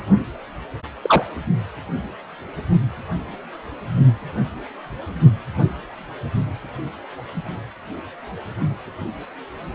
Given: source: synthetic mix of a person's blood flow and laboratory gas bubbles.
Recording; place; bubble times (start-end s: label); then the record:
Doppler ultrasound of blood flow; precordium
1.02-1.24 s: bubbles
From the record:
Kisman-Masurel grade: 113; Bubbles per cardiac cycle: 1 to 2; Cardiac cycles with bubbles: 1 to 10%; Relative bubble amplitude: loud (0.450 to 0.775); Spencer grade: 1 (occasional bubble signal discernible with the cardiac motion signal, with majority of cardiac periods free of bubbles); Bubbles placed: only in the low amplitude regions of the cardiac cycle